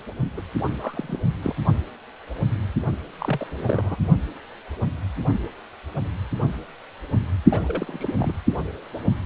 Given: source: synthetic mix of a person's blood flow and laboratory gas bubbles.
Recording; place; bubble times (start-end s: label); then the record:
Doppler ultrasound of blood flow; precordium
0.37-0.41 s: bubbles
0.68-1.19 s: bubbles
1.43-1.55 s: bubbles
3.19-3.96 s: bubbles
7.50-8.14 s: bubbles
8.18-8.33 s: bubbles
From the record:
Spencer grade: 2 (many but less than half of the cardiac periods contain bubble signals, singularly or in groups); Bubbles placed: only in the low amplitude regions of the cardiac cycle